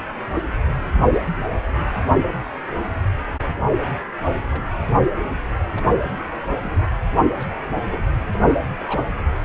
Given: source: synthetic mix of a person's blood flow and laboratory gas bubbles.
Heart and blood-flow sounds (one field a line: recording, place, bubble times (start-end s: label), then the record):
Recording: Doppler ultrasound of blood flow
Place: precordium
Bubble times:
0.93-0.97 s: bubbles
1.12-1.19 s: bubbles
4.50-4.64 s: bubbles
4.72-4.77 s: bubbles
5.74-5.83 s: bubbles
6.40-6.76 s: bubbles
7.32-7.53 s: bubbles
7.90-8.06 s: bubbles
8.29-8.44 s: bubbles
8.79-8.83 s: bubbles
8.87-9.03 s: bubbles
From the record:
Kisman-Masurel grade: 121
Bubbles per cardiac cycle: 1 to 2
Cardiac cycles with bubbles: 10 to 50%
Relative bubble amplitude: barely perceptible (0.100 to 0.250)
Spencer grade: 2 (many but less than half of the cardiac periods contain bubble signals, singularly or in groups)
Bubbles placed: anywhere in the cardiac cycle